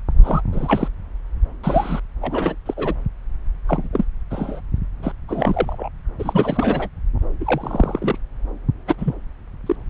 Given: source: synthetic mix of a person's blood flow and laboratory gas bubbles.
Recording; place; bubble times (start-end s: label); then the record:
Doppler ultrasound of blood flow; subclavian vein
0.24-0.42 s: bubbles
0.52-0.88 s: bubbles
1.64-2.00 s: bubbles
2.21-2.55 s: bubbles
2.66-2.74 s: bubbles
2.77-2.95 s: bubbles
3.68-3.89 s: bubbles
3.92-4.04 s: bubbles
4.30-4.60 s: bubbles
5.02-5.12 s: bubbles
5.29-5.89 s: bubbles
6.18-6.88 s: bubbles
7.40-8.18 s: bubbles
8.87-8.95 s: bubbles
8.98-9.15 s: bubbles
9.66-9.76 s: bubbles
From the record:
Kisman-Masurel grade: 242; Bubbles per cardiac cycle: several, 3 to 8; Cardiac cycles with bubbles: 100%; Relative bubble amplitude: moderate (0.250 to 0.450); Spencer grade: 3 (all of the cardiac periods contain showers or single bubble signals, but not dominating or overriding the cardiac motion signals); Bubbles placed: anywhere in the cardiac cycle